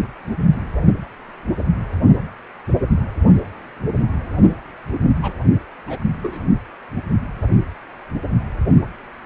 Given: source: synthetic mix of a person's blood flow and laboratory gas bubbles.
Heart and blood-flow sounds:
Doppler ultrasound of blood flow; precordium
5.21-5.34 s: bubbles
5.87-6.04 s: bubbles
6.23-6.48 s: bubbles
From the record:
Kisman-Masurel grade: 221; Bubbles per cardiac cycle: several, 3 to 8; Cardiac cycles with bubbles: 10 to 50%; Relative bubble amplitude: barely perceptible (0.100 to 0.250); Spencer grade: 2 (many but less than half of the cardiac periods contain bubble signals, singularly or in groups); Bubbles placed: anywhere in the cardiac cycle

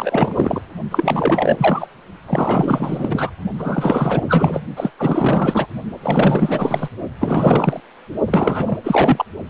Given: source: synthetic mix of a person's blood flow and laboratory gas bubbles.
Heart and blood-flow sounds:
Doppler ultrasound of blood flow; precordium
0.00-0.62 s: bubbles
0.90-1.87 s: bubbles
2.26-3.31 s: bubbles
3.58-4.61 s: bubbles
4.76-4.91 s: bubbles
4.98-5.67 s: bubbles
6.02-6.88 s: bubbles
7.21-7.80 s: bubbles
8.27-8.77 s: bubbles
8.83-9.25 s: bubbles
From the record:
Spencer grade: 4 (maximum detectable bubble signal sounding continuously throughout systole and diastole of every cardiac period, and overriding the amplitude of the normal cardiac signals); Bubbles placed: only in the low amplitude regions of the cardiac cycle

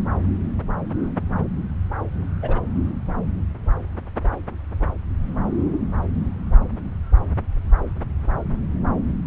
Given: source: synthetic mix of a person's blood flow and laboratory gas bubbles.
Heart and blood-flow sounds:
Doppler ultrasound of blood flow; subclavian vein
2.42-2.60 s: bubbles
From the record:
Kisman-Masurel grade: 111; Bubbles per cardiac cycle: 1 to 2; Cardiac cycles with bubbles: 1 to 10%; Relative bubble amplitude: barely perceptible (0.100 to 0.250); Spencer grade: 1 (occasional bubble signal discernible with the cardiac motion signal, with majority of cardiac periods free of bubbles); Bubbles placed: anywhere in the cardiac cycle

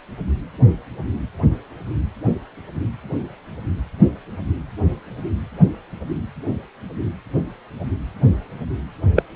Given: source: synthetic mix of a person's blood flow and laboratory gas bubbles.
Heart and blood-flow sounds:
Doppler ultrasound of blood flow; precordium
9.15-9.23 s: bubbles
From the record:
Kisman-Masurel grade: 113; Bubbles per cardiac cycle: 1 to 2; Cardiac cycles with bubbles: 1 to 10%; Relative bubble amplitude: loud (0.450 to 0.775); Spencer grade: 1 (occasional bubble signal discernible with the cardiac motion signal, with majority of cardiac periods free of bubbles); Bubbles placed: anywhere in the cardiac cycle

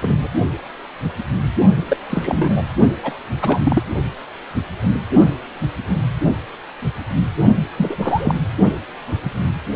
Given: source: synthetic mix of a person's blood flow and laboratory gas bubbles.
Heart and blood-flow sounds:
Doppler ultrasound of blood flow; precordium
0.02-0.28 s: bubbles
1.88-1.97 s: bubbles
2.09-2.62 s: bubbles
3.03-3.13 s: bubbles
3.42-3.82 s: bubbles
7.77-8.39 s: bubbles
From the record:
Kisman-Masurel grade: 222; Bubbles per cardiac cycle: several, 3 to 8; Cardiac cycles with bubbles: 10 to 50%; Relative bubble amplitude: moderate (0.250 to 0.450); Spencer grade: 2 (many but less than half of the cardiac periods contain bubble signals, singularly or in groups); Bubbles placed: only in the low amplitude regions of the cardiac cycle

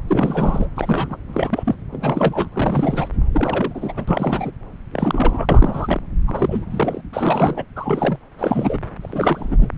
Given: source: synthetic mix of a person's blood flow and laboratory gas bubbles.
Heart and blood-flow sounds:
Doppler ultrasound of blood flow; subclavian vein
0.07-0.68 s: bubbles
0.76-1.17 s: bubbles
1.32-1.75 s: bubbles
1.92-2.49 s: bubbles
2.53-3.08 s: bubbles
3.33-3.93 s: bubbles
3.96-4.04 s: bubbles
4.08-4.51 s: bubbles
4.93-6.00 s: bubbles
6.27-6.66 s: bubbles
6.71-7.01 s: bubbles
7.13-7.65 s: bubbles
7.75-8.18 s: bubbles
8.38-8.79 s: bubbles
9.00-9.70 s: bubbles
From the record:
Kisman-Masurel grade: 332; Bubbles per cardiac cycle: rolling drumbeat, 9 or more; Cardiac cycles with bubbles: 50 to 99%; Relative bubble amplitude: moderate (0.250 to 0.450); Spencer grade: 3 (all of the cardiac periods contain showers or single bubble signals, but not dominating or overriding the cardiac motion signals); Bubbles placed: anywhere in the cardiac cycle

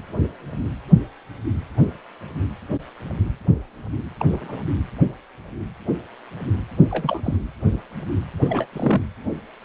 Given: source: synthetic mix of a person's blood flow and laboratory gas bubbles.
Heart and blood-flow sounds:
Doppler ultrasound of blood flow; precordium
4.17-4.25 s: bubbles
4.32-4.37 s: bubbles
4.41-4.63 s: bubbles
6.91-7.37 s: bubbles
8.41-8.67 s: bubbles
8.72-9.02 s: bubbles
From the record:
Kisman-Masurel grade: 221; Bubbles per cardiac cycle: several, 3 to 8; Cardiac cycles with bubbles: 10 to 50%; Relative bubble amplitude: barely perceptible (0.100 to 0.250); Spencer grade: 2 (many but less than half of the cardiac periods contain bubble signals, singularly or in groups); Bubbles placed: anywhere in the cardiac cycle

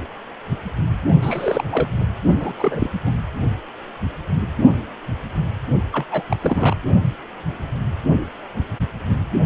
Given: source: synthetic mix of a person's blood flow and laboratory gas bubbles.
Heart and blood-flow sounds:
Doppler ultrasound of blood flow; precordium
1.21-1.64 s: bubbles
1.71-1.89 s: bubbles
2.00-2.05 s: bubbles
2.40-2.53 s: bubbles
2.56-2.89 s: bubbles
3.05-3.12 s: bubbles
5.92-6.06 s: bubbles
6.11-6.23 s: bubbles
6.30-6.75 s: bubbles
From the record:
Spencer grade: 2 (many but less than half of the cardiac periods contain bubble signals, singularly or in groups); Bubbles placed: only in the low amplitude regions of the cardiac cycle

